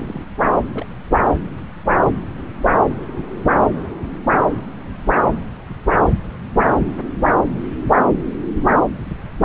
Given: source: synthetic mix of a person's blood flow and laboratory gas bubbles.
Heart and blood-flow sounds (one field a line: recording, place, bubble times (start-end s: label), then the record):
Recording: Doppler ultrasound of blood flow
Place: subclavian vein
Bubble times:
0.00-0.23 s: bubbles
0.73-0.86 s: bubbles
2.28-2.51 s: bubbles
From the record:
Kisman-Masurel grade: 121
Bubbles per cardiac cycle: 1 to 2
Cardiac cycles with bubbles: 10 to 50%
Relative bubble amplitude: barely perceptible (0.100 to 0.250)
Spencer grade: 2 (many but less than half of the cardiac periods contain bubble signals, singularly or in groups)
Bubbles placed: anywhere in the cardiac cycle